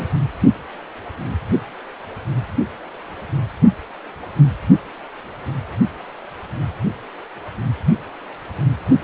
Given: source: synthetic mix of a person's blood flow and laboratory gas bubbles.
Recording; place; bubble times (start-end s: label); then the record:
Doppler ultrasound of blood flow; precordium
0.00-0.06 s: bubbles
From the record:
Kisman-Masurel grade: 212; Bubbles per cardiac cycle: several, 3 to 8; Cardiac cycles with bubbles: 1 to 10%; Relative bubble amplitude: moderate (0.250 to 0.450); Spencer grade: 1 (occasional bubble signal discernible with the cardiac motion signal, with majority of cardiac periods free of bubbles); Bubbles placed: anywhere in the cardiac cycle